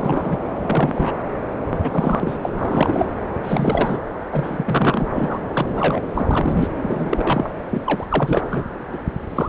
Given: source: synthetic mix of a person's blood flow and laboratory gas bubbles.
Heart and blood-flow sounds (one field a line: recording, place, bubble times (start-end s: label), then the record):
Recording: Doppler ultrasound of blood flow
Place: subclavian vein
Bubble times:
0.00-0.37 s: bubbles
0.55-1.23 s: bubbles
1.70-2.38 s: bubbles
2.42-2.50 s: bubbles
2.58-3.12 s: bubbles
3.43-4.01 s: bubbles
4.31-5.07 s: bubbles
5.14-5.39 s: bubbles
5.52-6.01 s: bubbles
6.13-6.67 s: bubbles
6.82-7.50 s: bubbles
7.71-7.81 s: bubbles
7.84-8.06 s: bubbles
8.09-8.45 s: bubbles
8.50-8.63 s: bubbles
8.91-8.97 s: bubbles
9.29-9.49 s: bubbles
From the record:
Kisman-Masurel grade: 243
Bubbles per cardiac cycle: several, 3 to 8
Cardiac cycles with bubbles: 100%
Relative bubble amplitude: loud (0.450 to 0.775)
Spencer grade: 3 (all of the cardiac periods contain showers or single bubble signals, but not dominating or overriding the cardiac motion signals)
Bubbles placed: anywhere in the cardiac cycle